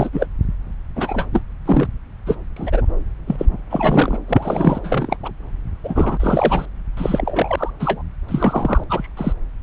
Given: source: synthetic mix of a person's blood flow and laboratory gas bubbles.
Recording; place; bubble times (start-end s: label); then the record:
Doppler ultrasound of blood flow; subclavian vein
0.00-0.10 s: bubbles
0.12-0.27 s: bubbles
0.96-1.26 s: bubbles
1.32-1.42 s: bubbles
1.66-1.88 s: bubbles
2.26-2.36 s: bubbles
2.56-2.82 s: bubbles
3.27-3.57 s: bubbles
3.70-4.18 s: bubbles
4.27-4.80 s: bubbles
4.83-5.17 s: bubbles
5.22-5.31 s: bubbles
5.83-6.65 s: bubbles
6.97-7.71 s: bubbles
7.79-8.03 s: bubbles
8.28-8.84 s: bubbles
8.89-9.08 s: bubbles
9.17-9.32 s: bubbles
From the record:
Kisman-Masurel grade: 243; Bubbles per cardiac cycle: several, 3 to 8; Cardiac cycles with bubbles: 100%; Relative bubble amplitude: loud (0.450 to 0.775); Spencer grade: 3 (all of the cardiac periods contain showers or single bubble signals, but not dominating or overriding the cardiac motion signals); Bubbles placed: anywhere in the cardiac cycle